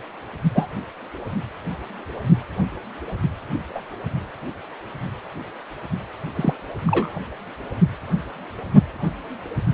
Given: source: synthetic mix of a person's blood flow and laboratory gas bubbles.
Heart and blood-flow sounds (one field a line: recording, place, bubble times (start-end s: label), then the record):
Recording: Doppler ultrasound of blood flow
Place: precordium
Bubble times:
0.55-0.68 s: bubbles
3.75-3.81 s: bubbles
6.36-6.54 s: bubbles
6.87-7.19 s: bubbles
From the record:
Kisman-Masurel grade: 123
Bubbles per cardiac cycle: 1 to 2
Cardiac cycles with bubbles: 10 to 50%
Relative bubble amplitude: loud (0.450 to 0.775)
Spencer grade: 2 (many but less than half of the cardiac periods contain bubble signals, singularly or in groups)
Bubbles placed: anywhere in the cardiac cycle